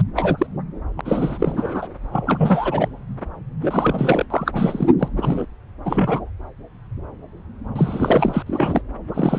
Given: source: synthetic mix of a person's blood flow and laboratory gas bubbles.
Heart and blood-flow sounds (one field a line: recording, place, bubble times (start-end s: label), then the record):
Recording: Doppler ultrasound of blood flow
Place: subclavian vein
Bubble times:
0.16-0.47 s: bubbles
0.97-1.01 s: bubbles
1.05-1.88 s: bubbles
2.12-2.88 s: bubbles
3.63-4.26 s: bubbles
4.30-4.88 s: bubbles
4.99-5.08 s: bubbles
5.16-5.46 s: bubbles
5.85-6.21 s: bubbles
7.75-8.42 s: bubbles
8.46-8.81 s: bubbles
9.14-9.39 s: bubbles
From the record:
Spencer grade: 3 (all of the cardiac periods contain showers or single bubble signals, but not dominating or overriding the cardiac motion signals)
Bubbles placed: anywhere in the cardiac cycle